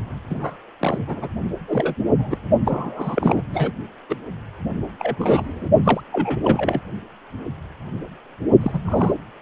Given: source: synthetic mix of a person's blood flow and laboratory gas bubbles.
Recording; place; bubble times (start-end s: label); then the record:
Doppler ultrasound of blood flow; precordium
0.30-0.57 s: bubbles
0.79-1.28 s: bubbles
1.68-1.95 s: bubbles
2.18-2.37 s: bubbles
2.65-3.42 s: bubbles
3.54-3.72 s: bubbles
4.08-4.15 s: bubbles
4.98-5.69 s: bubbles
5.84-6.01 s: bubbles
6.12-6.40 s: bubbles
6.43-6.80 s: bubbles
8.61-9.13 s: bubbles
From the record:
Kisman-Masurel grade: 232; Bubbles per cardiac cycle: several, 3 to 8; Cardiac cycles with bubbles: 50 to 99%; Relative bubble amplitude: moderate (0.250 to 0.450); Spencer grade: 3 (all of the cardiac periods contain showers or single bubble signals, but not dominating or overriding the cardiac motion signals); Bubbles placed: only in the low amplitude regions of the cardiac cycle